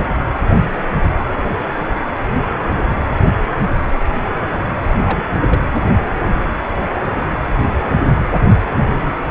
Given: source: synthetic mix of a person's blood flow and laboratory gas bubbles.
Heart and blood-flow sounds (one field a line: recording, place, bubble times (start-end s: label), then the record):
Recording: Doppler ultrasound of blood flow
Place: precordium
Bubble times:
5.05-5.22 s: bubbles
5.34-5.40 s: bubbles
5.48-5.61 s: bubbles
From the record:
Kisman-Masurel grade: 212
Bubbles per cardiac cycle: several, 3 to 8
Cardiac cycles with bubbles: 1 to 10%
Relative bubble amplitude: moderate (0.250 to 0.450)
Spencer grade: 1 (occasional bubble signal discernible with the cardiac motion signal, with majority of cardiac periods free of bubbles)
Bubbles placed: anywhere in the cardiac cycle